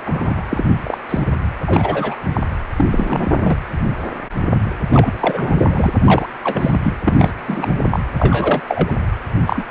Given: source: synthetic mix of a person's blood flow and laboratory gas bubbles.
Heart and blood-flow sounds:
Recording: Doppler ultrasound of blood flow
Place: precordium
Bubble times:
0.04-0.43 s: bubbles
0.51-0.66 s: bubbles
0.83-0.98 s: bubbles
1.09-1.26 s: bubbles
1.66-2.17 s: bubbles
2.33-2.41 s: bubbles
2.76-2.86 s: bubbles
2.92-3.58 s: bubbles
4.92-5.56 s: bubbles
5.58-5.91 s: bubbles
6.04-6.29 s: bubbles
6.44-6.80 s: bubbles
6.83-6.94 s: bubbles
7.05-7.31 s: bubbles
7.48-7.72 s: bubbles
7.90-8.00 s: bubbles
8.18-8.61 s: bubbles
8.68-8.93 s: bubbles
9.46-9.65 s: bubbles
From the record:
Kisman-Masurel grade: 233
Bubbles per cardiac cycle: several, 3 to 8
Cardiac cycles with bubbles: 50 to 99%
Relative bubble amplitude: loud (0.450 to 0.775)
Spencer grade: 3 (all of the cardiac periods contain showers or single bubble signals, but not dominating or overriding the cardiac motion signals)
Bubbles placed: anywhere in the cardiac cycle

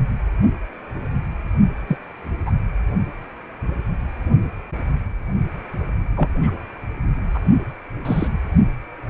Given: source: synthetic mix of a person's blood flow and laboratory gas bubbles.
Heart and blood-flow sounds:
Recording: Doppler ultrasound of blood flow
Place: precordium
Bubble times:
1.87-1.97 s: bubbles
2.46-2.52 s: bubbles
6.15-6.29 s: bubbles
6.42-6.51 s: bubbles
7.34-7.38 s: bubbles
8.05-8.28 s: bubbles
From the record:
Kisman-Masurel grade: 122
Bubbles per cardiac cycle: 1 to 2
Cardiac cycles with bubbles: 10 to 50%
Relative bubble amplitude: moderate (0.250 to 0.450)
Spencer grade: 2 (many but less than half of the cardiac periods contain bubble signals, singularly or in groups)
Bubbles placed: only in the low amplitude regions of the cardiac cycle

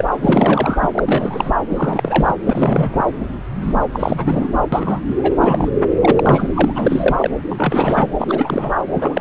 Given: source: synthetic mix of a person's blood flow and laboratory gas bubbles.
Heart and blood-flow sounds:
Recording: Doppler ultrasound of blood flow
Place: subclavian vein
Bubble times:
0.00-0.04 s: bubbles
0.22-0.89 s: bubbles
0.93-1.55 s: bubbles
1.68-2.34 s: bubbles
2.46-3.04 s: bubbles
3.60-3.74 s: bubbles
3.94-4.49 s: bubbles
4.72-5.00 s: bubbles
5.17-5.34 s: bubbles
5.41-5.71 s: bubbles
6.00-6.50 s: bubbles
6.54-7.30 s: bubbles
7.49-8.07 s: bubbles
8.19-8.75 s: bubbles
8.94-9.21 s: bubbles
From the record:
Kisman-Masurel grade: 343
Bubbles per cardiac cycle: rolling drumbeat, 9 or more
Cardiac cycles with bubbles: 100%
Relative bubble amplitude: loud (0.450 to 0.775)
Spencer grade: 3 (all of the cardiac periods contain showers or single bubble signals, but not dominating or overriding the cardiac motion signals)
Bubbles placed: anywhere in the cardiac cycle

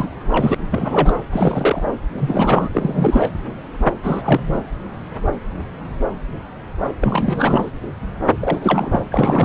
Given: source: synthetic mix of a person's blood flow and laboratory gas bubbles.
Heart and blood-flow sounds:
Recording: Doppler ultrasound of blood flow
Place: subclavian vein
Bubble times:
0.00-0.08 s: bubbles
0.30-0.55 s: bubbles
0.71-1.18 s: bubbles
1.31-1.84 s: bubbles
2.18-2.68 s: bubbles
2.74-3.31 s: bubbles
4.03-4.63 s: bubbles
7.00-7.71 s: bubbles
8.40-9.04 s: bubbles
9.12-9.45 s: bubbles
From the record:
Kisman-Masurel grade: 332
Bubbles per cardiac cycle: rolling drumbeat, 9 or more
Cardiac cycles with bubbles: 50 to 99%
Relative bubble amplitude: moderate (0.250 to 0.450)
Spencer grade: 3 (all of the cardiac periods contain showers or single bubble signals, but not dominating or overriding the cardiac motion signals)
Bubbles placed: anywhere in the cardiac cycle

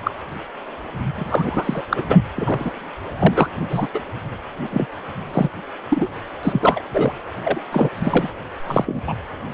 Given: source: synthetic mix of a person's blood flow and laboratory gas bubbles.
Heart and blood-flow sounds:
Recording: Doppler ultrasound of blood flow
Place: precordium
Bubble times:
0.04-0.11 s: bubbles
1.15-1.81 s: bubbles
1.90-2.04 s: bubbles
2.08-2.17 s: bubbles
2.36-2.72 s: bubbles
3.19-3.48 s: bubbles
3.69-3.87 s: bubbles
3.94-4.00 s: bubbles
4.70-4.87 s: bubbles
5.32-5.50 s: bubbles
5.90-6.07 s: bubbles
6.43-6.84 s: bubbles
6.93-7.12 s: bubbles
7.43-7.61 s: bubbles
7.72-7.89 s: bubbles
7.99-8.31 s: bubbles
8.66-9.00 s: bubbles
9.07-9.13 s: bubbles
From the record:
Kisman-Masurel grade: 243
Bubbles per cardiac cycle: several, 3 to 8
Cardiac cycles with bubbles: 100%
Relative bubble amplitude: loud (0.450 to 0.775)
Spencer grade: 3 (all of the cardiac periods contain showers or single bubble signals, but not dominating or overriding the cardiac motion signals)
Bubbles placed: anywhere in the cardiac cycle

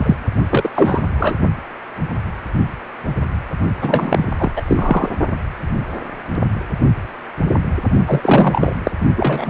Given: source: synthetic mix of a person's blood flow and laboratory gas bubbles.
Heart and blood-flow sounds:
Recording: Doppler ultrasound of blood flow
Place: precordium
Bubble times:
0.00-0.16 s: bubbles
0.49-0.70 s: bubbles
0.74-1.34 s: bubbles
3.81-4.30 s: bubbles
4.38-4.51 s: bubbles
4.56-4.62 s: bubbles
4.67-5.09 s: bubbles
8.06-8.76 s: bubbles
8.84-8.92 s: bubbles
9.16-9.49 s: bubbles
From the record:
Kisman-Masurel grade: 333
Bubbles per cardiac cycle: rolling drumbeat, 9 or more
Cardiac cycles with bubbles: 50 to 99%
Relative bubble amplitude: loud (0.450 to 0.775)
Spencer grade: 3 (all of the cardiac periods contain showers or single bubble signals, but not dominating or overriding the cardiac motion signals)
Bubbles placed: only in the low amplitude regions of the cardiac cycle

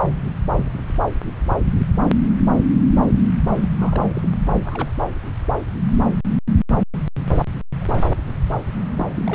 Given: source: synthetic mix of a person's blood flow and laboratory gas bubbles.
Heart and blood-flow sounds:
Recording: Doppler ultrasound of blood flow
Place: subclavian vein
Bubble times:
3.58-3.69 s: bubbles
3.77-4.29 s: bubbles
4.64-4.91 s: bubbles
7.81-7.85 s: bubbles
7.95-8.07 s: bubbles
8.96-9.10 s: bubbles
9.14-9.23 s: bubbles
9.26-9.35 s: bubbles
From the record:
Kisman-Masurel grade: 221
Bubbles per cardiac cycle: several, 3 to 8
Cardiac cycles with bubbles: 10 to 50%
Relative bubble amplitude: barely perceptible (0.100 to 0.250)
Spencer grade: 2 (many but less than half of the cardiac periods contain bubble signals, singularly or in groups)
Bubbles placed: anywhere in the cardiac cycle

